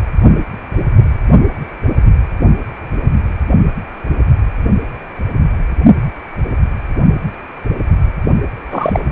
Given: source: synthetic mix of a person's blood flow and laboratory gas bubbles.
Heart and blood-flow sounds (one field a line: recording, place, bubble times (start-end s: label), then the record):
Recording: Doppler ultrasound of blood flow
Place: precordium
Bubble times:
8.70-9.00 s: bubbles
9.10-9.12 s: bubbles
From the record:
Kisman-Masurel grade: 213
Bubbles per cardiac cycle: several, 3 to 8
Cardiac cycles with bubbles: 1 to 10%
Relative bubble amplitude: loud (0.450 to 0.775)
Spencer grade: 1 (occasional bubble signal discernible with the cardiac motion signal, with majority of cardiac periods free of bubbles)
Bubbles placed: only in the low amplitude regions of the cardiac cycle